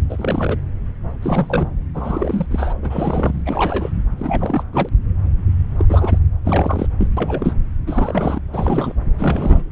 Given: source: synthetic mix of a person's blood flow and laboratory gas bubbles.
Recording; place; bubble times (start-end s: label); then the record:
Doppler ultrasound of blood flow; subclavian vein
0.09-0.57 s: bubbles
1.22-1.68 s: bubbles
1.95-2.46 s: bubbles
2.51-2.73 s: bubbles
2.82-3.42 s: bubbles
3.46-3.91 s: bubbles
4.17-4.63 s: bubbles
4.73-4.89 s: bubbles
5.77-5.85 s: bubbles
5.88-6.19 s: bubbles
6.45-6.87 s: bubbles
6.99-7.07 s: bubbles
7.17-7.54 s: bubbles
7.87-8.40 s: bubbles
8.52-8.92 s: bubbles
9.18-9.63 s: bubbles
From the record:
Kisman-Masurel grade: 332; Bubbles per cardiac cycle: rolling drumbeat, 9 or more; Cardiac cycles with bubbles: 50 to 99%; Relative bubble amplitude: moderate (0.250 to 0.450); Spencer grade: 3 (all of the cardiac periods contain showers or single bubble signals, but not dominating or overriding the cardiac motion signals); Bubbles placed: anywhere in the cardiac cycle